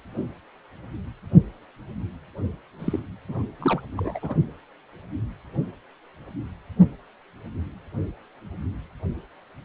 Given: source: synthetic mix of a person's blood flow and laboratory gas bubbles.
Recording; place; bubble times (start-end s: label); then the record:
Doppler ultrasound of blood flow; precordium
2.79-2.99 s: bubbles
3.28-3.42 s: bubbles
3.59-3.81 s: bubbles
3.96-4.20 s: bubbles
4.22-4.35 s: bubbles
From the record:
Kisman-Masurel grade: 221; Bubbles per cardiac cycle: several, 3 to 8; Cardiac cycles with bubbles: 10 to 50%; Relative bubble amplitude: barely perceptible (0.100 to 0.250); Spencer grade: 2 (many but less than half of the cardiac periods contain bubble signals, singularly or in groups); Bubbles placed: anywhere in the cardiac cycle